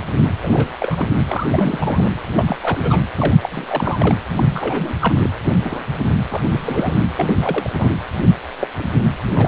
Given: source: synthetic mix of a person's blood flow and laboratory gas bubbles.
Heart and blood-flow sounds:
Doppler ultrasound of blood flow; precordium
0.16-0.31 s: bubbles
0.42-0.70 s: bubbles
0.80-1.07 s: bubbles
1.13-1.22 s: bubbles
1.28-2.12 s: bubbles
2.36-2.45 s: bubbles
2.48-2.57 s: bubbles
2.61-3.00 s: bubbles
3.17-3.35 s: bubbles
3.43-4.14 s: bubbles
4.35-4.96 s: bubbles
4.99-5.27 s: bubbles
5.59-5.87 s: bubbles
6.02-6.10 s: bubbles
6.29-6.42 s: bubbles
6.44-6.94 s: bubbles
7.15-7.33 s: bubbles
7.42-7.92 s: bubbles
8.61-8.67 s: bubbles
8.79-8.89 s: bubbles
9.32-9.48 s: bubbles
From the record:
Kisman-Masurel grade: 242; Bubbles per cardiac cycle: several, 3 to 8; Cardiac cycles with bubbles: 100%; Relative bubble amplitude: moderate (0.250 to 0.450); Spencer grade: 3 (all of the cardiac periods contain showers or single bubble signals, but not dominating or overriding the cardiac motion signals); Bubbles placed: anywhere in the cardiac cycle

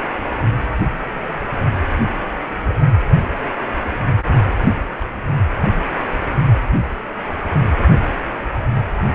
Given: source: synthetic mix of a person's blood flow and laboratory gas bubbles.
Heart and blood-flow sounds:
Doppler ultrasound of blood flow; precordium
2.70-2.75 s: bubbles
2.92-3.00 s: bubbles
4.98-5.09 s: bubbles
5.31-5.35 s: bubbles
From the record:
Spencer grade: 2 (many but less than half of the cardiac periods contain bubble signals, singularly or in groups); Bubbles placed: anywhere in the cardiac cycle

